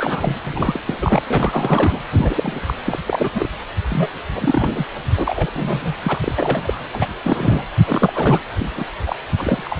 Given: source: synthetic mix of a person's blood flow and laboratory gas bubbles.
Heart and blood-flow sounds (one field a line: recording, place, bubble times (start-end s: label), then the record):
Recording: Doppler ultrasound of blood flow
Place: precordium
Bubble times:
0.00-0.38 s: bubbles
0.43-0.80 s: bubbles
0.86-0.94 s: bubbles
1.02-1.21 s: bubbles
1.27-2.00 s: bubbles
2.11-2.60 s: bubbles
2.67-2.74 s: bubbles
2.84-2.98 s: bubbles
3.06-3.30 s: bubbles
3.34-3.48 s: bubbles
3.90-4.08 s: bubbles
4.36-4.85 s: bubbles
5.16-5.95 s: bubbles
6.03-6.19 s: bubbles
6.23-6.79 s: bubbles
6.93-7.06 s: bubbles
7.24-7.62 s: bubbles
7.87-8.40 s: bubbles
8.51-8.85 s: bubbles
9.01-9.15 s: bubbles
9.37-9.62 s: bubbles
9.64-9.77 s: bubbles
From the record:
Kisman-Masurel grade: 342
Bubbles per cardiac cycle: rolling drumbeat, 9 or more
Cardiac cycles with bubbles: 100%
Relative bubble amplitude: moderate (0.250 to 0.450)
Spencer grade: 3 (all of the cardiac periods contain showers or single bubble signals, but not dominating or overriding the cardiac motion signals)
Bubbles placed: anywhere in the cardiac cycle